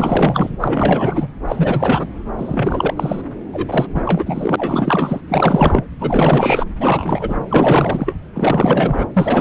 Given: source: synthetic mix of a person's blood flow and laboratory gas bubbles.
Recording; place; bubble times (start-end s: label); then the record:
Doppler ultrasound of blood flow; subclavian vein
0.00-0.57 s: bubbles
0.60-1.27 s: bubbles
1.45-2.06 s: bubbles
2.38-3.21 s: bubbles
3.52-3.86 s: bubbles
3.94-5.21 s: bubbles
5.28-5.84 s: bubbles
5.98-6.65 s: bubbles
6.79-7.39 s: bubbles
7.49-8.16 s: bubbles
8.34-9.05 s: bubbles
9.16-9.41 s: bubbles
From the record:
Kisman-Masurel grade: 444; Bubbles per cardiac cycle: continuous sound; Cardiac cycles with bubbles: 100%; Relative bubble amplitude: maximal (0.775 to 0.999); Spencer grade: 4 (maximum detectable bubble signal sounding continuously throughout systole and diastole of every cardiac period, and overriding the amplitude of the normal cardiac signals); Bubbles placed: anywhere in the cardiac cycle